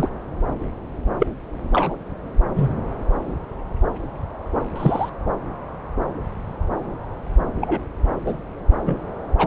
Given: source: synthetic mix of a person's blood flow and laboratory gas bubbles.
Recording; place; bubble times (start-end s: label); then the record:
Doppler ultrasound of blood flow; subclavian vein
0.00-0.08 s: bubbles
1.20-1.27 s: bubbles
1.73-1.97 s: bubbles
2.55-2.74 s: bubbles
4.75-5.09 s: bubbles
7.60-7.81 s: bubbles
8.25-8.37 s: bubbles
8.86-8.97 s: bubbles
9.38-9.46 s: bubbles
From the record:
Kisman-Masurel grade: 122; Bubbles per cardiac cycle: 1 to 2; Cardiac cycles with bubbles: 10 to 50%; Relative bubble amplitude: moderate (0.250 to 0.450); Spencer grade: 2 (many but less than half of the cardiac periods contain bubble signals, singularly or in groups); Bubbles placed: anywhere in the cardiac cycle